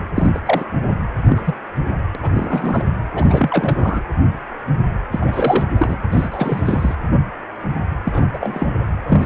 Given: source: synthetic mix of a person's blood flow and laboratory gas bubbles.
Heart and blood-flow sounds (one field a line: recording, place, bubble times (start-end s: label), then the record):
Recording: Doppler ultrasound of blood flow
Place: precordium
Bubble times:
0.15-0.30 s: bubbles
0.34-0.40 s: bubbles
0.45-0.64 s: bubbles
1.25-1.42 s: bubbles
1.46-1.54 s: bubbles
2.15-2.18 s: bubbles
2.22-2.31 s: bubbles
2.33-2.84 s: bubbles
3.15-4.01 s: bubbles
5.11-5.64 s: bubbles
5.77-5.97 s: bubbles
6.11-6.28 s: bubbles
6.31-6.95 s: bubbles
8.04-8.29 s: bubbles
8.33-8.69 s: bubbles
9.07-9.26 s: bubbles
From the record:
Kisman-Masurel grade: 233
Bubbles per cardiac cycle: several, 3 to 8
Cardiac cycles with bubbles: 50 to 99%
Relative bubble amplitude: loud (0.450 to 0.775)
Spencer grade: 3 (all of the cardiac periods contain showers or single bubble signals, but not dominating or overriding the cardiac motion signals)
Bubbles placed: anywhere in the cardiac cycle